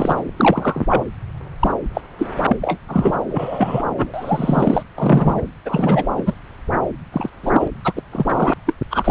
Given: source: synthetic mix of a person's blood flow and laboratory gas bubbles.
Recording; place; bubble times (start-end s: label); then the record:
Doppler ultrasound of blood flow; subclavian vein
0.00-0.23 s: bubbles
0.37-0.85 s: bubbles
0.88-1.04 s: bubbles
1.59-1.74 s: bubbles
1.94-2.01 s: bubbles
2.18-2.29 s: bubbles
2.48-2.56 s: bubbles
2.61-2.77 s: bubbles
2.88-3.18 s: bubbles
3.28-3.82 s: bubbles
3.96-4.83 s: bubbles
4.98-5.42 s: bubbles
5.65-6.08 s: bubbles
6.17-6.34 s: bubbles
7.12-7.29 s: bubbles
7.43-7.68 s: bubbles
7.84-7.93 s: bubbles
7.96-8.02 s: bubbles
8.12-8.54 s: bubbles
8.65-8.73 s: bubbles
8.91-9.11 s: bubbles
From the record:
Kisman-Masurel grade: 243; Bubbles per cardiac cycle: several, 3 to 8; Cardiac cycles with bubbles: 100%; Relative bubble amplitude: loud (0.450 to 0.775); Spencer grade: 3 (all of the cardiac periods contain showers or single bubble signals, but not dominating or overriding the cardiac motion signals); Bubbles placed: anywhere in the cardiac cycle